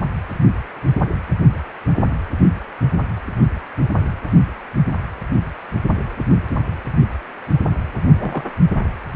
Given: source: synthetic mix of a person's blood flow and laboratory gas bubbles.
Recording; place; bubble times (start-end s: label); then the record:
Doppler ultrasound of blood flow; precordium
8.19-8.44 s: bubbles
From the record:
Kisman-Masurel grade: 112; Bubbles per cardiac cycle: 1 to 2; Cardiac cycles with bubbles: 1 to 10%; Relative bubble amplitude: moderate (0.250 to 0.450); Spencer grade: 1 (occasional bubble signal discernible with the cardiac motion signal, with majority of cardiac periods free of bubbles); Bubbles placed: only in the low amplitude regions of the cardiac cycle